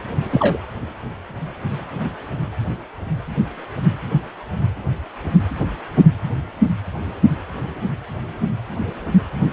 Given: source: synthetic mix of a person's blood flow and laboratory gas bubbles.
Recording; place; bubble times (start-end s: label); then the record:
Doppler ultrasound of blood flow; precordium
0.30-0.57 s: bubbles
From the record:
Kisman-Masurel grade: 113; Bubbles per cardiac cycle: 1 to 2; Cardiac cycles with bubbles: 1 to 10%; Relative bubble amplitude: loud (0.450 to 0.775); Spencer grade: 1 (occasional bubble signal discernible with the cardiac motion signal, with majority of cardiac periods free of bubbles); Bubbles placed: anywhere in the cardiac cycle